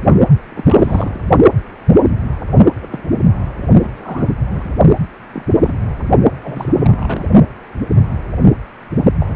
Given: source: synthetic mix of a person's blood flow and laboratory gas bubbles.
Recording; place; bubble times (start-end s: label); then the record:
Doppler ultrasound of blood flow; precordium
0.49-1.20 s: bubbles
2.81-2.87 s: bubbles
2.90-3.03 s: bubbles
3.79-4.30 s: bubbles
4.49-4.72 s: bubbles
5.33-5.42 s: bubbles
5.60-5.76 s: bubbles
6.42-7.25 s: bubbles
9.21-9.35 s: bubbles
From the record:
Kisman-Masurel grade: 232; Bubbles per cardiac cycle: several, 3 to 8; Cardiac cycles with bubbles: 50 to 99%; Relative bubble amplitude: moderate (0.250 to 0.450); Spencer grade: 3 (all of the cardiac periods contain showers or single bubble signals, but not dominating or overriding the cardiac motion signals); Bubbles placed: only in the low amplitude regions of the cardiac cycle